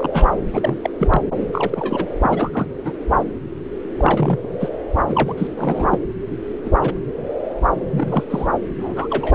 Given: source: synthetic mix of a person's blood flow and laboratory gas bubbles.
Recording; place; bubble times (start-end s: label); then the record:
Doppler ultrasound of blood flow; subclavian vein
0.00-0.10 s: bubbles
0.13-0.28 s: bubbles
0.54-0.78 s: bubbles
0.83-0.91 s: bubbles
0.99-1.22 s: bubbles
1.52-2.07 s: bubbles
2.23-2.69 s: bubbles
2.84-2.92 s: bubbles
3.98-4.38 s: bubbles
4.43-4.47 s: bubbles
4.60-4.69 s: bubbles
5.05-5.33 s: bubbles
5.38-5.47 s: bubbles
5.56-5.97 s: bubbles
6.64-6.70 s: bubbles
6.81-6.93 s: bubbles
7.91-8.24 s: bubbles
8.30-8.47 s: bubbles
8.78-9.07 s: bubbles
9.10-9.34 s: bubbles
From the record:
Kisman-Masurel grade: 232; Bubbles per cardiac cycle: several, 3 to 8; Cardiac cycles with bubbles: 50 to 99%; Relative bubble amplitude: moderate (0.250 to 0.450); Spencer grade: 3 (all of the cardiac periods contain showers or single bubble signals, but not dominating or overriding the cardiac motion signals); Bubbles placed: anywhere in the cardiac cycle